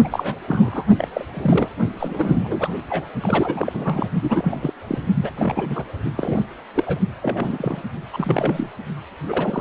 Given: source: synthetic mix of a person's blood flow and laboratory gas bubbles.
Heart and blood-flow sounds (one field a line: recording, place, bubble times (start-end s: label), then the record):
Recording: Doppler ultrasound of blood flow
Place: precordium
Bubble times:
0.04-0.08 s: bubbles
0.11-0.35 s: bubbles
0.47-0.85 s: bubbles
0.98-1.08 s: bubbles
1.13-1.25 s: bubbles
1.33-1.69 s: bubbles
1.99-2.69 s: bubbles
2.90-3.04 s: bubbles
3.21-4.08 s: bubbles
4.21-4.71 s: bubbles
4.87-4.98 s: bubbles
5.13-5.31 s: bubbles
5.38-5.83 s: bubbles
6.16-6.46 s: bubbles
6.75-6.99 s: bubbles
7.22-7.83 s: bubbles
8.13-8.70 s: bubbles
9.28-9.61 s: bubbles
From the record:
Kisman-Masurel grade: 342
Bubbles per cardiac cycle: rolling drumbeat, 9 or more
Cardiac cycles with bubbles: 100%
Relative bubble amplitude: moderate (0.250 to 0.450)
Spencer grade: 3 (all of the cardiac periods contain showers or single bubble signals, but not dominating or overriding the cardiac motion signals)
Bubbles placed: only in the low amplitude regions of the cardiac cycle